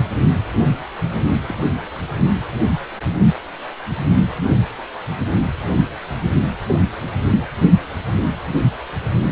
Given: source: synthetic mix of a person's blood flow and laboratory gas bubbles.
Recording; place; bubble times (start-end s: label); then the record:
Doppler ultrasound of blood flow; precordium
1.48-1.55 s: bubbles
6.67-6.85 s: bubbles
From the record:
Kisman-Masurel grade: 121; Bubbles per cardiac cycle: 1 to 2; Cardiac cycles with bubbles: 10 to 50%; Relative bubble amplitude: barely perceptible (0.100 to 0.250); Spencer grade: 2 (many but less than half of the cardiac periods contain bubble signals, singularly or in groups); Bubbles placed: anywhere in the cardiac cycle